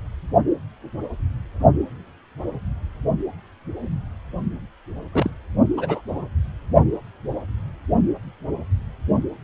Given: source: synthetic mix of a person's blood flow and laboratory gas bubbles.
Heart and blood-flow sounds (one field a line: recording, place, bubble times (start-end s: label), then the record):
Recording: Doppler ultrasound of blood flow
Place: precordium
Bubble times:
5.12-5.30 s: bubbles
5.77-6.01 s: bubbles
6.08-6.28 s: bubbles
From the record:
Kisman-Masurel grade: 122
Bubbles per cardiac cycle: 1 to 2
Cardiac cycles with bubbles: 10 to 50%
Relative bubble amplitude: moderate (0.250 to 0.450)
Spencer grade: 2 (many but less than half of the cardiac periods contain bubble signals, singularly or in groups)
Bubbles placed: only in the low amplitude regions of the cardiac cycle